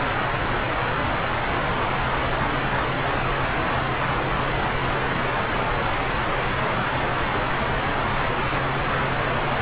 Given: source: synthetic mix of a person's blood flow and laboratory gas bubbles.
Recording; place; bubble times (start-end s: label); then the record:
Doppler ultrasound of blood flow; subclavian vein
no bubbles
From the record:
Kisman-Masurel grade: 000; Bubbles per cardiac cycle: 0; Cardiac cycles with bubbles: 0%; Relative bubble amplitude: no bubbles discernible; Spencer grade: 0 (complete lack of bubble signals)